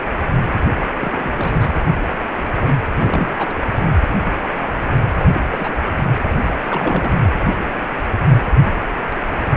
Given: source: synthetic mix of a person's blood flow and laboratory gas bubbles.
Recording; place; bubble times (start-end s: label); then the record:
Doppler ultrasound of blood flow; precordium
0.79-0.86 s: bubbles
0.99-1.33 s: bubbles
1.36-1.74 s: bubbles
2.99-3.34 s: bubbles
3.38-3.56 s: bubbles
3.86-3.92 s: bubbles
5.15-5.28 s: bubbles
5.33-5.48 s: bubbles
5.52-5.78 s: bubbles
6.32-6.50 s: bubbles
6.69-7.14 s: bubbles
7.23-7.29 s: bubbles
From the record:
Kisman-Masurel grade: 221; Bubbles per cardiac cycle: several, 3 to 8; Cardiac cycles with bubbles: 10 to 50%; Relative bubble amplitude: barely perceptible (0.100 to 0.250); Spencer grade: 2 (many but less than half of the cardiac periods contain bubble signals, singularly or in groups); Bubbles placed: anywhere in the cardiac cycle